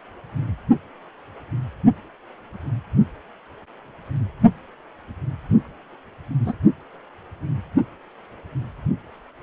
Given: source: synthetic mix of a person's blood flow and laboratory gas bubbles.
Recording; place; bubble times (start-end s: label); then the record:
Doppler ultrasound of blood flow; precordium
6.46-6.55 s: bubbles
From the record:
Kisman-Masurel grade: 121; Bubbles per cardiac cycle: 1 to 2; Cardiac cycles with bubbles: 10 to 50%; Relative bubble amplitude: barely perceptible (0.100 to 0.250); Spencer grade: 2 (many but less than half of the cardiac periods contain bubble signals, singularly or in groups); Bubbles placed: only in the low amplitude regions of the cardiac cycle